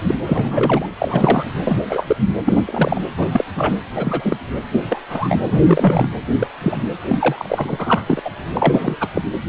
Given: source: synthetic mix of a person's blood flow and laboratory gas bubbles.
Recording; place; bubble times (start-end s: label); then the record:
Doppler ultrasound of blood flow; precordium
0.00-0.02 s: bubbles
0.07-0.14 s: bubbles
0.26-0.87 s: bubbles
0.98-1.44 s: bubbles
1.64-1.76 s: bubbles
1.89-2.04 s: bubbles
2.07-2.17 s: bubbles
2.45-2.64 s: bubbles
2.67-3.02 s: bubbles
3.18-3.27 s: bubbles
3.33-3.44 s: bubbles
3.54-3.77 s: bubbles
3.94-4.37 s: bubbles
4.72-4.83 s: bubbles
4.89-5.01 s: bubbles
5.09-5.38 s: bubbles
5.49-5.60 s: bubbles
5.66-6.10 s: bubbles
6.39-6.47 s: bubbles
6.62-6.80 s: bubbles
7.08-8.21 s: bubbles
8.24-8.30 s: bubbles
8.53-8.97 s: bubbles
9.00-9.07 s: bubbles
9.14-9.21 s: bubbles
From the record:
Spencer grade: 3 (all of the cardiac periods contain showers or single bubble signals, but not dominating or overriding the cardiac motion signals); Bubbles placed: anywhere in the cardiac cycle